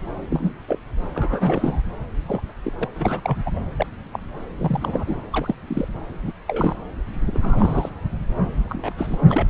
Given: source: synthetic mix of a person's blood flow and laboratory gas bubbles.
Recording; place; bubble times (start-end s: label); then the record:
Doppler ultrasound of blood flow; subclavian vein
0.30-0.52 s: bubbles
0.68-0.77 s: bubbles
1.14-1.82 s: bubbles
2.27-2.40 s: bubbles
2.63-2.73 s: bubbles
2.79-2.89 s: bubbles
2.94-3.37 s: bubbles
3.45-3.50 s: bubbles
3.55-3.59 s: bubbles
3.77-3.86 s: bubbles
4.12-4.20 s: bubbles
4.58-5.15 s: bubbles
5.33-5.54 s: bubbles
5.67-5.88 s: bubbles
6.23-6.33 s: bubbles
6.48-6.76 s: bubbles
7.27-7.89 s: bubbles
8.64-8.93 s: bubbles
8.96-9.17 s: bubbles
9.27-9.46 s: bubbles
From the record:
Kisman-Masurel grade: 232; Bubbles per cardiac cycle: several, 3 to 8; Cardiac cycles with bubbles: 50 to 99%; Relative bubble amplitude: moderate (0.250 to 0.450); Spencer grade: 3 (all of the cardiac periods contain showers or single bubble signals, but not dominating or overriding the cardiac motion signals); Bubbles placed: anywhere in the cardiac cycle